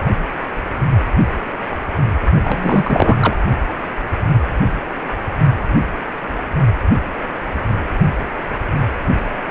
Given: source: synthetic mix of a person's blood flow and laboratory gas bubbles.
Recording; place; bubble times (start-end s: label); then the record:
Doppler ultrasound of blood flow; precordium
2.44-3.17 s: bubbles
3.20-3.36 s: bubbles
From the record:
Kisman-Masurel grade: 213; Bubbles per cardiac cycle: several, 3 to 8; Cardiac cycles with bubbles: 1 to 10%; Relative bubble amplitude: loud (0.450 to 0.775); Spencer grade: 1 (occasional bubble signal discernible with the cardiac motion signal, with majority of cardiac periods free of bubbles); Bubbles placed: only in the low amplitude regions of the cardiac cycle